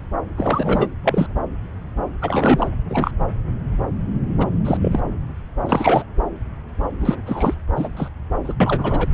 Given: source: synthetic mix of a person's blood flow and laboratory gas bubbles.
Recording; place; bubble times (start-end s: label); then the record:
Doppler ultrasound of blood flow; subclavian vein
0.37-0.88 s: bubbles
1.04-1.28 s: bubbles
2.21-2.69 s: bubbles
2.89-3.11 s: bubbles
4.38-4.47 s: bubbles
4.64-4.78 s: bubbles
4.82-5.00 s: bubbles
5.66-6.04 s: bubbles
7.00-7.21 s: bubbles
7.26-7.54 s: bubbles
7.76-7.88 s: bubbles
7.96-8.08 s: bubbles
8.44-8.54 s: bubbles
8.60-9.09 s: bubbles
From the record:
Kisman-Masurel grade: 233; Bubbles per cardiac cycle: several, 3 to 8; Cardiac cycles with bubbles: 50 to 99%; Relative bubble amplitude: loud (0.450 to 0.775); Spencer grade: 3 (all of the cardiac periods contain showers or single bubble signals, but not dominating or overriding the cardiac motion signals); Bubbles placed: anywhere in the cardiac cycle